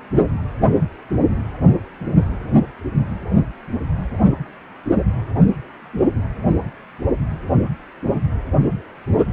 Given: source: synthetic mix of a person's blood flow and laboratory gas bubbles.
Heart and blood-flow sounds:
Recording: Doppler ultrasound of blood flow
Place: precordium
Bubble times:
no bubbles
From the record:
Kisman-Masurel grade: 000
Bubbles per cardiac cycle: 0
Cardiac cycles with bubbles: 0%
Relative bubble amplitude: no bubbles discernible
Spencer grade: 0 (complete lack of bubble signals)

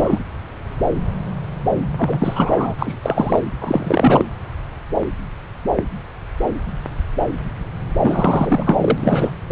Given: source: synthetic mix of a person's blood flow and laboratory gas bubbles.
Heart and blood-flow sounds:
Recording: Doppler ultrasound of blood flow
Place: subclavian vein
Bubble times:
0.00-0.18 s: bubbles
1.97-2.74 s: bubbles
2.78-2.96 s: bubbles
3.02-3.40 s: bubbles
3.61-4.25 s: bubbles
8.01-9.31 s: bubbles
From the record:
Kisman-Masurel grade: 333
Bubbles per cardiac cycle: rolling drumbeat, 9 or more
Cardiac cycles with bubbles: 50 to 99%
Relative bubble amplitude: loud (0.450 to 0.775)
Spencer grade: 3 (all of the cardiac periods contain showers or single bubble signals, but not dominating or overriding the cardiac motion signals)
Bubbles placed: anywhere in the cardiac cycle

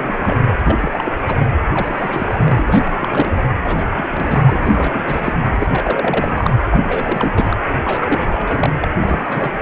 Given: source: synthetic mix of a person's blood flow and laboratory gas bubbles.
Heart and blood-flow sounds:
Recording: Doppler ultrasound of blood flow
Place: precordium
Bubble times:
0.00-0.38 s: bubbles
0.64-1.12 s: bubbles
1.27-1.46 s: bubbles
1.70-3.43 s: bubbles
3.64-3.84 s: bubbles
3.97-4.03 s: bubbles
4.09-5.33 s: bubbles
5.58-5.67 s: bubbles
5.71-6.55 s: bubbles
6.71-6.78 s: bubbles
6.82-7.57 s: bubbles
7.84-8.88 s: bubbles
9.01-9.19 s: bubbles
9.27-9.57 s: bubbles
From the record:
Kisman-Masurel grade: 342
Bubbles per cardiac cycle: rolling drumbeat, 9 or more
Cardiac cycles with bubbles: 100%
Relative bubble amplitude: moderate (0.250 to 0.450)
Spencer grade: 3 (all of the cardiac periods contain showers or single bubble signals, but not dominating or overriding the cardiac motion signals)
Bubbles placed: anywhere in the cardiac cycle

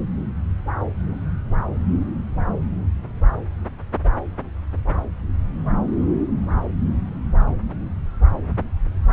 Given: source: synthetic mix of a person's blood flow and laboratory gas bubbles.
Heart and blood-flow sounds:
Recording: Doppler ultrasound of blood flow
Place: subclavian vein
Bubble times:
no bubbles
From the record:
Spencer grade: 0 (complete lack of bubble signals)

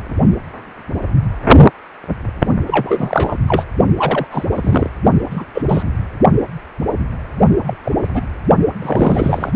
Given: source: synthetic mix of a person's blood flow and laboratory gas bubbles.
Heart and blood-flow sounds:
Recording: Doppler ultrasound of blood flow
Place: precordium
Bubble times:
2.67-3.37 s: bubbles
3.48-3.65 s: bubbles
3.96-4.26 s: bubbles
4.31-4.46 s: bubbles
4.51-4.92 s: bubbles
5.30-5.46 s: bubbles
5.54-5.62 s: bubbles
5.67-5.83 s: bubbles
7.67-7.74 s: bubbles
7.85-7.92 s: bubbles
8.03-8.26 s: bubbles
8.81-9.52 s: bubbles
From the record:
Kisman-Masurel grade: 233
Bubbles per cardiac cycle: several, 3 to 8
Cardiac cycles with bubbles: 50 to 99%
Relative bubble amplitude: loud (0.450 to 0.775)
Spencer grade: 3 (all of the cardiac periods contain showers or single bubble signals, but not dominating or overriding the cardiac motion signals)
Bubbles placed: only in the low amplitude regions of the cardiac cycle

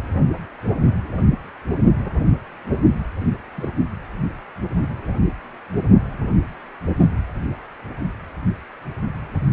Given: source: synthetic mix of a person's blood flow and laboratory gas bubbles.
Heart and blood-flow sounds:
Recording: Doppler ultrasound of blood flow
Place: precordium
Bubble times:
3.56-3.71 s: bubbles
From the record:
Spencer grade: 1 (occasional bubble signal discernible with the cardiac motion signal, with majority of cardiac periods free of bubbles)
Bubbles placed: only in the low amplitude regions of the cardiac cycle

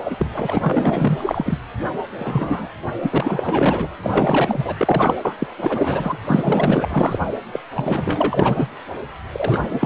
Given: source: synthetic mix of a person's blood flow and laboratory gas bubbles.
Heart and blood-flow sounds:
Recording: Doppler ultrasound of blood flow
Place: precordium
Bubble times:
0.04-0.27 s: bubbles
0.32-1.58 s: bubbles
2.19-2.70 s: bubbles
3.02-3.87 s: bubbles
4.01-4.75 s: bubbles
4.78-5.14 s: bubbles
5.25-5.34 s: bubbles
5.38-5.47 s: bubbles
5.62-6.18 s: bubbles
6.25-7.18 s: bubbles
7.53-7.59 s: bubbles
7.75-8.68 s: bubbles
9.32-9.86 s: bubbles
From the record:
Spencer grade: 4 (maximum detectable bubble signal sounding continuously throughout systole and diastole of every cardiac period, and overriding the amplitude of the normal cardiac signals)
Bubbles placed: anywhere in the cardiac cycle

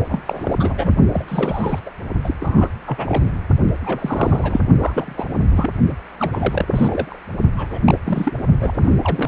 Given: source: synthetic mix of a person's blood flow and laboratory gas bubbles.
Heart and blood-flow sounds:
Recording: Doppler ultrasound of blood flow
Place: precordium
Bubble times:
0.08-0.23 s: bubbles
0.25-0.56 s: bubbles
0.59-0.74 s: bubbles
0.77-0.93 s: bubbles
1.10-1.25 s: bubbles
1.28-1.79 s: bubbles
1.85-1.89 s: bubbles
2.24-2.34 s: bubbles
2.40-2.68 s: bubbles
2.86-3.31 s: bubbles
3.84-4.62 s: bubbles
4.79-5.26 s: bubbles
5.50-5.71 s: bubbles
5.90-5.96 s: bubbles
6.20-6.67 s: bubbles
6.70-7.19 s: bubbles
7.57-7.81 s: bubbles
7.85-7.98 s: bubbles
8.05-8.33 s: bubbles
8.59-8.93 s: bubbles
9.04-9.28 s: bubbles
From the record:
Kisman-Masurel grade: 342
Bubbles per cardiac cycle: rolling drumbeat, 9 or more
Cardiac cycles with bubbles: 100%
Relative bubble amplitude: moderate (0.250 to 0.450)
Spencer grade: 3 (all of the cardiac periods contain showers or single bubble signals, but not dominating or overriding the cardiac motion signals)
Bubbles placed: only in the low amplitude regions of the cardiac cycle

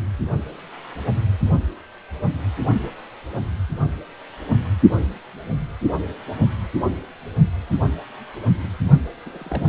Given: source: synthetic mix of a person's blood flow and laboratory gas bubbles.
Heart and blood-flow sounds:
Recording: Doppler ultrasound of blood flow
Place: precordium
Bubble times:
9.26-9.69 s: bubbles
From the record:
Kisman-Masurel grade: 211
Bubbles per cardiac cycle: several, 3 to 8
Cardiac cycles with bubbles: 1 to 10%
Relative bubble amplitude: barely perceptible (0.100 to 0.250)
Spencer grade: 1 (occasional bubble signal discernible with the cardiac motion signal, with majority of cardiac periods free of bubbles)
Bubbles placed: only in the low amplitude regions of the cardiac cycle

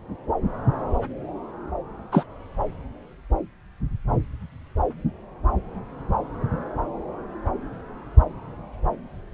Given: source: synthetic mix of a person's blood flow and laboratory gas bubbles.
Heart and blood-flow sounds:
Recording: Doppler ultrasound of blood flow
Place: subclavian vein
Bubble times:
2.12-2.25 s: bubbles
From the record:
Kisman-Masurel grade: 113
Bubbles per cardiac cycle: 1 to 2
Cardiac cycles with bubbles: 1 to 10%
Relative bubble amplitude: loud (0.450 to 0.775)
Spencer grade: 1 (occasional bubble signal discernible with the cardiac motion signal, with majority of cardiac periods free of bubbles)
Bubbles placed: anywhere in the cardiac cycle

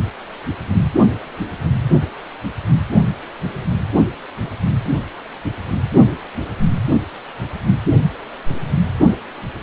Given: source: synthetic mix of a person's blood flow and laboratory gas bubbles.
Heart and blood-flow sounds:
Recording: Doppler ultrasound of blood flow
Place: precordium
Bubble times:
4.39-4.50 s: bubbles
From the record:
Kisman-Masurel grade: 121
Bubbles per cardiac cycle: 1 to 2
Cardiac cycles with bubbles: 10 to 50%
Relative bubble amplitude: barely perceptible (0.100 to 0.250)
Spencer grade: 2 (many but less than half of the cardiac periods contain bubble signals, singularly or in groups)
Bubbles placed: only in the low amplitude regions of the cardiac cycle

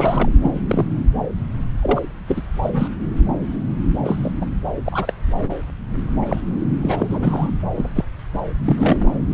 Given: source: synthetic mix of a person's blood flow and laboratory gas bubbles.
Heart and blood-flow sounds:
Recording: Doppler ultrasound of blood flow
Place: subclavian vein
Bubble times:
0.00-0.29 s: bubbles
0.42-0.51 s: bubbles
0.69-0.87 s: bubbles
1.82-2.01 s: bubbles
2.27-2.42 s: bubbles
2.62-2.71 s: bubbles
2.73-2.88 s: bubbles
4.03-4.31 s: bubbles
4.41-4.46 s: bubbles
4.85-5.13 s: bubbles
5.38-5.54 s: bubbles
6.21-6.43 s: bubbles
6.81-7.51 s: bubbles
7.76-7.89 s: bubbles
7.95-8.04 s: bubbles
8.32-8.39 s: bubbles
8.65-9.16 s: bubbles
From the record:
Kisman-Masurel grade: 233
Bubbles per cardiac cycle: several, 3 to 8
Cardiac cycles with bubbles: 50 to 99%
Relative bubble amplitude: loud (0.450 to 0.775)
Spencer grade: 3 (all of the cardiac periods contain showers or single bubble signals, but not dominating or overriding the cardiac motion signals)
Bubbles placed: anywhere in the cardiac cycle

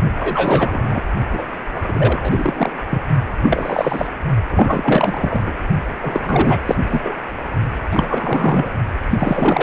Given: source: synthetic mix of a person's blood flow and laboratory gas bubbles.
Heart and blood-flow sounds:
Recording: Doppler ultrasound of blood flow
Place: precordium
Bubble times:
0.17-1.02 s: bubbles
1.31-1.46 s: bubbles
1.73-2.73 s: bubbles
2.88-3.02 s: bubbles
3.42-4.07 s: bubbles
4.47-5.42 s: bubbles
5.46-5.51 s: bubbles
6.01-6.61 s: bubbles
6.65-6.76 s: bubbles
6.89-7.14 s: bubbles
7.91-8.70 s: bubbles
9.09-9.63 s: bubbles
From the record:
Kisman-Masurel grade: 343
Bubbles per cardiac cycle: rolling drumbeat, 9 or more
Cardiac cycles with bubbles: 100%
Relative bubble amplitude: loud (0.450 to 0.775)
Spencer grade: 3 (all of the cardiac periods contain showers or single bubble signals, but not dominating or overriding the cardiac motion signals)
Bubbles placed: only in the low amplitude regions of the cardiac cycle

